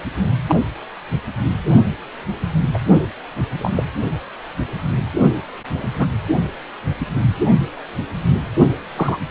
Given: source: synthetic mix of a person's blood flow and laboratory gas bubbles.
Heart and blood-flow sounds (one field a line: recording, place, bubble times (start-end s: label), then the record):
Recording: Doppler ultrasound of blood flow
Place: precordium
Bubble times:
0.48-0.55 s: bubbles
2.74-2.78 s: bubbles
3.59-3.71 s: bubbles
3.75-3.87 s: bubbles
5.74-5.87 s: bubbles
5.99-6.07 s: bubbles
8.96-9.19 s: bubbles
From the record:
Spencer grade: 2 (many but less than half of the cardiac periods contain bubble signals, singularly or in groups)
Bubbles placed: only in the low amplitude regions of the cardiac cycle